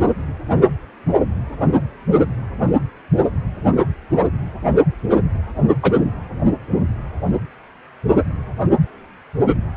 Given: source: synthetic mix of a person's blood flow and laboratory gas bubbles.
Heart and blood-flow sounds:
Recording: Doppler ultrasound of blood flow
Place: precordium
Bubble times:
5.82-5.93 s: bubbles
From the record:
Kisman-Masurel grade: 113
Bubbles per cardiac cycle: 1 to 2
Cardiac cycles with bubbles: 1 to 10%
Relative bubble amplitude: loud (0.450 to 0.775)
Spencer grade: 1 (occasional bubble signal discernible with the cardiac motion signal, with majority of cardiac periods free of bubbles)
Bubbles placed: anywhere in the cardiac cycle

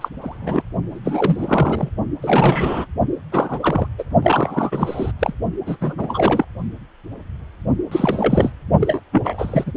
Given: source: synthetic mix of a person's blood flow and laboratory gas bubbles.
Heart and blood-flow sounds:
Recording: Doppler ultrasound of blood flow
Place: precordium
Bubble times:
0.00-0.09 s: bubbles
0.20-0.62 s: bubbles
0.91-1.90 s: bubbles
2.21-2.87 s: bubbles
3.32-3.88 s: bubbles
3.98-4.04 s: bubbles
4.22-5.12 s: bubbles
5.19-5.33 s: bubbles
5.66-5.76 s: bubbles
5.80-6.46 s: bubbles
7.91-8.53 s: bubbles
8.79-9.01 s: bubbles
9.12-9.72 s: bubbles
From the record:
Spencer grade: 3 (all of the cardiac periods contain showers or single bubble signals, but not dominating or overriding the cardiac motion signals)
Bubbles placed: only in the low amplitude regions of the cardiac cycle

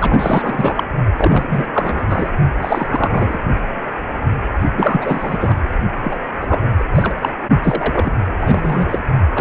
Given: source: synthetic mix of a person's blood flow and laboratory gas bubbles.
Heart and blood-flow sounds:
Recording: Doppler ultrasound of blood flow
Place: precordium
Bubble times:
0.01-0.83 s: bubbles
1.16-1.66 s: bubbles
1.73-2.30 s: bubbles
2.61-3.39 s: bubbles
4.76-5.56 s: bubbles
6.04-6.17 s: bubbles
6.41-6.61 s: bubbles
6.78-6.83 s: bubbles
6.95-7.14 s: bubbles
7.21-7.29 s: bubbles
7.63-8.11 s: bubbles
8.40-8.99 s: bubbles
9.35-9.41 s: bubbles
From the record:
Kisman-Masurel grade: 333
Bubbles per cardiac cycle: rolling drumbeat, 9 or more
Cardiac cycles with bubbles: 50 to 99%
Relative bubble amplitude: loud (0.450 to 0.775)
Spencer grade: 3 (all of the cardiac periods contain showers or single bubble signals, but not dominating or overriding the cardiac motion signals)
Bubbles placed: only in the low amplitude regions of the cardiac cycle

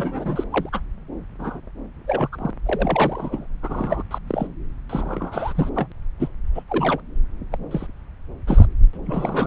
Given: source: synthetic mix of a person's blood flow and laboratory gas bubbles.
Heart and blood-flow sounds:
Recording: Doppler ultrasound of blood flow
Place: subclavian vein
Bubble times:
0.00-0.44 s: bubbles
0.51-0.69 s: bubbles
0.72-0.81 s: bubbles
1.38-1.60 s: bubbles
2.07-2.29 s: bubbles
2.32-2.50 s: bubbles
2.65-3.46 s: bubbles
3.62-4.03 s: bubbles
4.10-4.18 s: bubbles
4.27-4.47 s: bubbles
4.89-5.70 s: bubbles
5.75-5.87 s: bubbles
6.20-6.29 s: bubbles
6.55-6.63 s: bubbles
6.68-7.00 s: bubbles
7.51-7.58 s: bubbles
7.70-7.86 s: bubbles
8.47-8.66 s: bubbles
8.93-8.97 s: bubbles
9.06-9.47 s: bubbles
From the record:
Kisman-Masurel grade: 242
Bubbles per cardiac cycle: several, 3 to 8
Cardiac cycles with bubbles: 100%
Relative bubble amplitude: moderate (0.250 to 0.450)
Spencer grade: 3 (all of the cardiac periods contain showers or single bubble signals, but not dominating or overriding the cardiac motion signals)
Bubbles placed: anywhere in the cardiac cycle

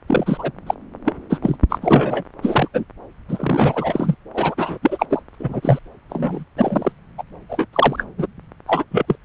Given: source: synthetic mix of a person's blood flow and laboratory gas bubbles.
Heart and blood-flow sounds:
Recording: Doppler ultrasound of blood flow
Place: subclavian vein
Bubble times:
0.07-0.51 s: bubbles
0.66-0.74 s: bubbles
1.05-1.14 s: bubbles
1.29-1.39 s: bubbles
1.42-1.56 s: bubbles
1.70-1.78 s: bubbles
1.81-2.24 s: bubbles
2.42-2.68 s: bubbles
2.74-2.85 s: bubbles
3.28-4.15 s: bubbles
4.34-4.54 s: bubbles
4.57-4.78 s: bubbles
4.82-5.06 s: bubbles
5.09-5.23 s: bubbles
5.39-5.79 s: bubbles
6.09-6.45 s: bubbles
6.57-6.92 s: bubbles
7.17-7.23 s: bubbles
7.49-7.66 s: bubbles
7.72-8.05 s: bubbles
8.17-8.27 s: bubbles
8.67-8.85 s: bubbles
8.90-9.15 s: bubbles
From the record:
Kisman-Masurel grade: 243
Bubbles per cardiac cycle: several, 3 to 8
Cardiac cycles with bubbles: 100%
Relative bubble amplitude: loud (0.450 to 0.775)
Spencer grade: 3 (all of the cardiac periods contain showers or single bubble signals, but not dominating or overriding the cardiac motion signals)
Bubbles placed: anywhere in the cardiac cycle

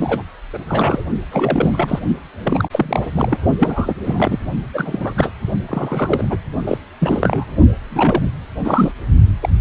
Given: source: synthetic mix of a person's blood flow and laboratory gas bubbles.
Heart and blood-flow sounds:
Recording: Doppler ultrasound of blood flow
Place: precordium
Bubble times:
0.00-0.23 s: bubbles
0.53-0.58 s: bubbles
0.67-1.05 s: bubbles
1.31-1.99 s: bubbles
2.43-2.69 s: bubbles
2.72-3.01 s: bubbles
3.13-3.38 s: bubbles
3.58-3.95 s: bubbles
4.05-4.39 s: bubbles
4.74-5.13 s: bubbles
5.17-5.30 s: bubbles
5.68-6.38 s: bubbles
6.66-6.78 s: bubbles
7.00-7.58 s: bubbles
7.90-8.30 s: bubbles
8.64-8.92 s: bubbles
9.41-9.49 s: bubbles
From the record:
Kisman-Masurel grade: 342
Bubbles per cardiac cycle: rolling drumbeat, 9 or more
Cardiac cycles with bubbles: 100%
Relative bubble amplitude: moderate (0.250 to 0.450)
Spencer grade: 3 (all of the cardiac periods contain showers or single bubble signals, but not dominating or overriding the cardiac motion signals)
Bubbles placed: only in the low amplitude regions of the cardiac cycle

